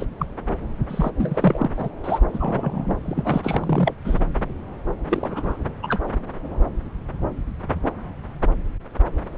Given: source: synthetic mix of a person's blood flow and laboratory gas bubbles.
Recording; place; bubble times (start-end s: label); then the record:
Doppler ultrasound of blood flow; subclavian vein
0.00-0.05 s: bubbles
0.18-0.27 s: bubbles
0.89-1.10 s: bubbles
1.18-1.69 s: bubbles
1.77-1.89 s: bubbles
2.03-2.19 s: bubbles
2.33-2.94 s: bubbles
3.04-3.94 s: bubbles
4.04-4.19 s: bubbles
5.09-5.57 s: bubbles
5.83-6.00 s: bubbles
From the record:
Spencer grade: 3 (all of the cardiac periods contain showers or single bubble signals, but not dominating or overriding the cardiac motion signals); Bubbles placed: anywhere in the cardiac cycle